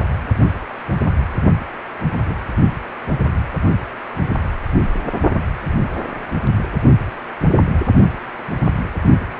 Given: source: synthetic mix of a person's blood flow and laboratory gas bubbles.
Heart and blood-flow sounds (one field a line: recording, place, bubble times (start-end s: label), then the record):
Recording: Doppler ultrasound of blood flow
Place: precordium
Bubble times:
2.17-2.34 s: bubbles
From the record:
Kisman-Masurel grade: 111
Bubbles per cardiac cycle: 1 to 2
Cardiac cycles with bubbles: 1 to 10%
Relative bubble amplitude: barely perceptible (0.100 to 0.250)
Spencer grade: 1 (occasional bubble signal discernible with the cardiac motion signal, with majority of cardiac periods free of bubbles)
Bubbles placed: only in the low amplitude regions of the cardiac cycle